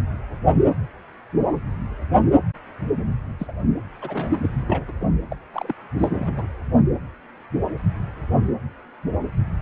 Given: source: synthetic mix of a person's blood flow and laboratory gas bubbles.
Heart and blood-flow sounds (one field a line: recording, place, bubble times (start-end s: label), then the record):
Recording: Doppler ultrasound of blood flow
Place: precordium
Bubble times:
3.39-3.53 s: bubbles
4.02-4.40 s: bubbles
4.43-4.91 s: bubbles
5.00-5.05 s: bubbles
5.31-5.36 s: bubbles
5.53-5.75 s: bubbles
5.99-6.46 s: bubbles
From the record:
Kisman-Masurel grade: 221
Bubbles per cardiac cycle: several, 3 to 8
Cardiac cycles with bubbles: 10 to 50%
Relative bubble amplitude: barely perceptible (0.100 to 0.250)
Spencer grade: 2 (many but less than half of the cardiac periods contain bubble signals, singularly or in groups)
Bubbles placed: anywhere in the cardiac cycle